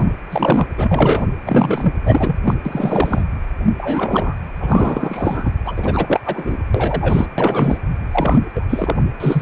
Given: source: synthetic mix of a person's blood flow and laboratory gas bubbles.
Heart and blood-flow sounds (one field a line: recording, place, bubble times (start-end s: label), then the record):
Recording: Doppler ultrasound of blood flow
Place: precordium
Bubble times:
0.00-0.15 s: bubbles
0.30-0.68 s: bubbles
0.77-1.26 s: bubbles
1.46-1.93 s: bubbles
2.05-2.37 s: bubbles
2.44-2.54 s: bubbles
2.65-3.22 s: bubbles
3.78-4.35 s: bubbles
4.60-5.52 s: bubbles
5.65-6.20 s: bubbles
6.25-6.58 s: bubbles
6.74-7.27 s: bubbles
7.38-7.78 s: bubbles
8.12-8.39 s: bubbles
8.54-8.65 s: bubbles
8.69-8.96 s: bubbles
9.20-9.42 s: bubbles
From the record:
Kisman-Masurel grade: 343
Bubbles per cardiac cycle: rolling drumbeat, 9 or more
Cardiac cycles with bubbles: 100%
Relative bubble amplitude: loud (0.450 to 0.775)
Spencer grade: 3 (all of the cardiac periods contain showers or single bubble signals, but not dominating or overriding the cardiac motion signals)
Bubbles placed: anywhere in the cardiac cycle